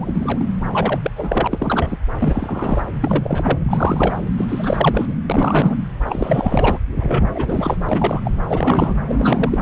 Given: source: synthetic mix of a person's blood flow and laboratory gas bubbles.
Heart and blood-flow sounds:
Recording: Doppler ultrasound of blood flow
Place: subclavian vein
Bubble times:
0.01-0.50 s: bubbles
0.72-1.00 s: bubbles
1.03-1.11 s: bubbles
1.16-1.47 s: bubbles
1.50-1.98 s: bubbles
2.19-2.86 s: bubbles
3.02-3.58 s: bubbles
3.61-4.21 s: bubbles
4.38-5.15 s: bubbles
5.29-5.75 s: bubbles
6.05-6.79 s: bubbles
6.92-7.24 s: bubbles
7.34-7.76 s: bubbles
7.89-8.21 s: bubbles
8.24-8.31 s: bubbles
8.48-8.96 s: bubbles
9.09-9.61 s: bubbles
From the record:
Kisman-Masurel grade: 342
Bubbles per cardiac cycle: rolling drumbeat, 9 or more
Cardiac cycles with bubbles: 100%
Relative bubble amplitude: moderate (0.250 to 0.450)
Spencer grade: 3 (all of the cardiac periods contain showers or single bubble signals, but not dominating or overriding the cardiac motion signals)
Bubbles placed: anywhere in the cardiac cycle

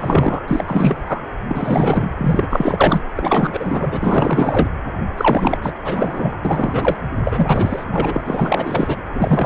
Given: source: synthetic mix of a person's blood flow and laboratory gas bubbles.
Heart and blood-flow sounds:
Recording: Doppler ultrasound of blood flow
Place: precordium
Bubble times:
0.00-0.40 s: bubbles
0.48-1.22 s: bubbles
1.48-2.12 s: bubbles
2.17-3.02 s: bubbles
3.17-4.68 s: bubbles
5.17-5.58 s: bubbles
5.62-5.72 s: bubbles
5.83-6.40 s: bubbles
6.45-6.96 s: bubbles
7.21-7.84 s: bubbles
7.92-8.21 s: bubbles
8.24-8.97 s: bubbles
9.14-9.46 s: bubbles
From the record:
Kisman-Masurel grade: 444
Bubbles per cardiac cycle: continuous sound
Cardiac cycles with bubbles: 100%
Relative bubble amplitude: maximal (0.775 to 0.999)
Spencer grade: 4 (maximum detectable bubble signal sounding continuously throughout systole and diastole of every cardiac period, and overriding the amplitude of the normal cardiac signals)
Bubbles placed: anywhere in the cardiac cycle

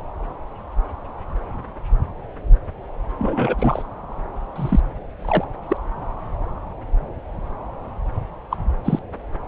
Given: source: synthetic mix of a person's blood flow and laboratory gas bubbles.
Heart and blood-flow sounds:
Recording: Doppler ultrasound of blood flow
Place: subclavian vein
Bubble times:
3.18-3.55 s: bubbles
3.58-3.83 s: bubbles
4.56-4.81 s: bubbles
5.16-5.45 s: bubbles
5.69-5.77 s: bubbles
8.51-8.58 s: bubbles
8.85-8.99 s: bubbles
From the record:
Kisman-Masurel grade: 122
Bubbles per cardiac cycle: 1 to 2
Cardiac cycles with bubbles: 10 to 50%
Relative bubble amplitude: moderate (0.250 to 0.450)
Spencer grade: 2 (many but less than half of the cardiac periods contain bubble signals, singularly or in groups)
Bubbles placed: anywhere in the cardiac cycle

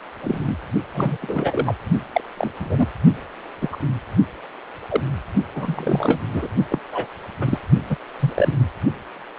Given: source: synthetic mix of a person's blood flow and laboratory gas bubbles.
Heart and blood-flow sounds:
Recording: Doppler ultrasound of blood flow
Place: precordium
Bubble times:
0.23-0.56 s: bubbles
0.94-1.17 s: bubbles
1.21-1.75 s: bubbles
2.12-2.21 s: bubbles
2.37-2.51 s: bubbles
2.58-2.87 s: bubbles
3.61-3.68 s: bubbles
3.72-3.76 s: bubbles
4.89-5.00 s: bubbles
5.55-6.20 s: bubbles
6.33-6.47 s: bubbles
6.68-6.79 s: bubbles
6.92-7.06 s: bubbles
7.41-7.58 s: bubbles
7.90-7.96 s: bubbles
8.20-8.54 s: bubbles
From the record:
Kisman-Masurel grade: 232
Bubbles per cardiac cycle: several, 3 to 8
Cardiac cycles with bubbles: 50 to 99%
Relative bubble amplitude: moderate (0.250 to 0.450)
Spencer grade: 3 (all of the cardiac periods contain showers or single bubble signals, but not dominating or overriding the cardiac motion signals)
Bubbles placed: only in the low amplitude regions of the cardiac cycle

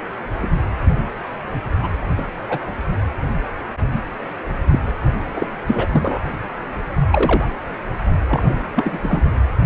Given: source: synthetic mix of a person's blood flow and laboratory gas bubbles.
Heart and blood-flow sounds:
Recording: Doppler ultrasound of blood flow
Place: precordium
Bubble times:
0.41-0.49 s: bubbles
1.79-1.90 s: bubbles
2.17-2.22 s: bubbles
2.49-2.71 s: bubbles
4.71-4.79 s: bubbles
5.33-5.47 s: bubbles
5.67-5.86 s: bubbles
5.92-6.18 s: bubbles
7.12-7.48 s: bubbles
8.29-8.57 s: bubbles
8.61-8.63 s: bubbles
8.76-9.28 s: bubbles
From the record:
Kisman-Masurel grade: 222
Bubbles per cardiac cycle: several, 3 to 8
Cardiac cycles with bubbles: 10 to 50%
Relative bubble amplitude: moderate (0.250 to 0.450)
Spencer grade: 2 (many but less than half of the cardiac periods contain bubble signals, singularly or in groups)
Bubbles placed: anywhere in the cardiac cycle

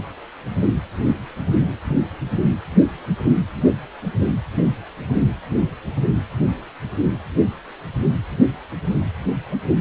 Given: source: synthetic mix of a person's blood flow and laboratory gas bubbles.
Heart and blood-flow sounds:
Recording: Doppler ultrasound of blood flow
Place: precordium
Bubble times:
no bubbles
From the record:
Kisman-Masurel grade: 000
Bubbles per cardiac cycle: 0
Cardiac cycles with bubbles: 0%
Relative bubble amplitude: no bubbles discernible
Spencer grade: 0 (complete lack of bubble signals)

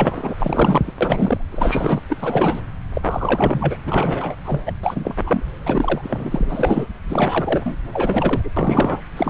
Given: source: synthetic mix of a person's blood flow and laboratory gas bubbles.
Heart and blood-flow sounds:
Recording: Doppler ultrasound of blood flow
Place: subclavian vein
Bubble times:
0.00-0.34 s: bubbles
0.39-0.93 s: bubbles
1.00-1.46 s: bubbles
1.52-2.00 s: bubbles
2.10-2.16 s: bubbles
2.22-2.60 s: bubbles
2.94-3.76 s: bubbles
3.86-4.35 s: bubbles
4.45-4.60 s: bubbles
4.66-4.71 s: bubbles
4.83-5.15 s: bubbles
5.26-5.43 s: bubbles
5.66-6.88 s: bubbles
7.09-7.75 s: bubbles
7.93-8.50 s: bubbles
8.56-9.01 s: bubbles
9.16-9.30 s: bubbles
From the record:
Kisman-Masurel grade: 342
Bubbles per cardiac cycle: rolling drumbeat, 9 or more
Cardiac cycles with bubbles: 100%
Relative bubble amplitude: moderate (0.250 to 0.450)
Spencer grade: 3 (all of the cardiac periods contain showers or single bubble signals, but not dominating or overriding the cardiac motion signals)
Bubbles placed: anywhere in the cardiac cycle

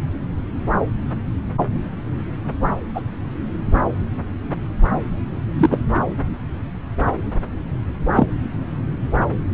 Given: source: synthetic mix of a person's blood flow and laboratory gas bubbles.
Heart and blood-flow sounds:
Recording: Doppler ultrasound of blood flow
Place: subclavian vein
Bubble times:
2.95-3.02 s: bubbles
5.53-5.79 s: bubbles
8.14-8.27 s: bubbles
From the record:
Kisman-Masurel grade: 123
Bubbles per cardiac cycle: 1 to 2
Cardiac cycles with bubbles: 10 to 50%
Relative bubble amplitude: loud (0.450 to 0.775)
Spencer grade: 2 (many but less than half of the cardiac periods contain bubble signals, singularly or in groups)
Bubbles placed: anywhere in the cardiac cycle

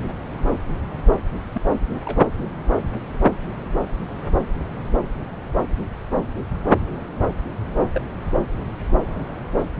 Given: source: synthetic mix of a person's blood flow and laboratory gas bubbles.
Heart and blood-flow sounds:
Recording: Doppler ultrasound of blood flow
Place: subclavian vein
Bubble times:
1.52-1.61 s: bubbles
1.94-1.99 s: bubbles
2.05-2.17 s: bubbles
7.95-8.02 s: bubbles
From the record:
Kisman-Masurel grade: 121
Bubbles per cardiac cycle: 1 to 2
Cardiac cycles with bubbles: 10 to 50%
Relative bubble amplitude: barely perceptible (0.100 to 0.250)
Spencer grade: 2 (many but less than half of the cardiac periods contain bubble signals, singularly or in groups)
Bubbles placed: anywhere in the cardiac cycle

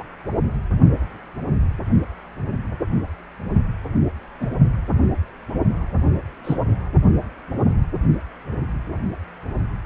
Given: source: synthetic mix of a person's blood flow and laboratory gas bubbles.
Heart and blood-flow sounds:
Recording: Doppler ultrasound of blood flow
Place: precordium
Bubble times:
0.00-0.03 s: bubbles
4.39-4.47 s: bubbles
6.44-6.56 s: bubbles
From the record:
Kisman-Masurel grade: 122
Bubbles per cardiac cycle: 1 to 2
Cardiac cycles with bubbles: 10 to 50%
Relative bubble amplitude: moderate (0.250 to 0.450)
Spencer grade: 2 (many but less than half of the cardiac periods contain bubble signals, singularly or in groups)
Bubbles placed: only in the low amplitude regions of the cardiac cycle

